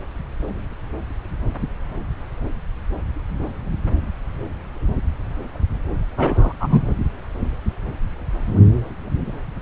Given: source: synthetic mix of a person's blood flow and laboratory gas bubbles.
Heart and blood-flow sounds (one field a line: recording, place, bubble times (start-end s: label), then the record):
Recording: Doppler ultrasound of blood flow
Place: subclavian vein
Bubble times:
6.17-6.53 s: bubbles
6.60-6.94 s: bubbles
From the record:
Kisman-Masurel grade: 213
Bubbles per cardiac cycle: several, 3 to 8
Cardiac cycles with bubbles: 1 to 10%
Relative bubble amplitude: loud (0.450 to 0.775)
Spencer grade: 1 (occasional bubble signal discernible with the cardiac motion signal, with majority of cardiac periods free of bubbles)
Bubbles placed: anywhere in the cardiac cycle